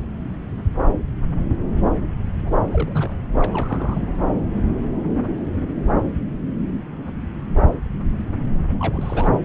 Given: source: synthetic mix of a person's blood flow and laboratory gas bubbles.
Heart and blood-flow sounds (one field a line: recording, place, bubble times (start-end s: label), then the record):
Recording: Doppler ultrasound of blood flow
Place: subclavian vein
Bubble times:
2.44-2.51 s: bubbles
2.65-3.17 s: bubbles
3.40-4.01 s: bubbles
8.79-9.29 s: bubbles
From the record:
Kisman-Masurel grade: 221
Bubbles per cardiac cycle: several, 3 to 8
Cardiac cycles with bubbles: 10 to 50%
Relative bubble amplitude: barely perceptible (0.100 to 0.250)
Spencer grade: 2 (many but less than half of the cardiac periods contain bubble signals, singularly or in groups)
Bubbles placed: anywhere in the cardiac cycle